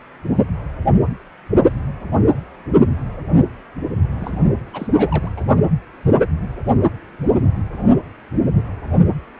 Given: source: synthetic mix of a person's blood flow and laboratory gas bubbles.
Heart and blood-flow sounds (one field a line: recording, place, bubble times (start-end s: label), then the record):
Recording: Doppler ultrasound of blood flow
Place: precordium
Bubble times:
4.19-4.52 s: bubbles
4.73-4.88 s: bubbles
4.96-5.29 s: bubbles
5.36-5.46 s: bubbles
From the record:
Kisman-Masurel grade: 211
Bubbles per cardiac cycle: several, 3 to 8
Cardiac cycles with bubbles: 1 to 10%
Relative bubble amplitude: barely perceptible (0.100 to 0.250)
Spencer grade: 1 (occasional bubble signal discernible with the cardiac motion signal, with majority of cardiac periods free of bubbles)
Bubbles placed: only in the low amplitude regions of the cardiac cycle